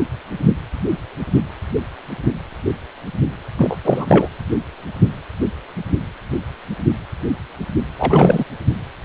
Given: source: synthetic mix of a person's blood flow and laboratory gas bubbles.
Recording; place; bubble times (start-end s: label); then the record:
Doppler ultrasound of blood flow; precordium
3.58-3.76 s: bubbles
3.83-4.29 s: bubbles
7.98-8.45 s: bubbles
From the record:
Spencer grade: 2 (many but less than half of the cardiac periods contain bubble signals, singularly or in groups); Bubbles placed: anywhere in the cardiac cycle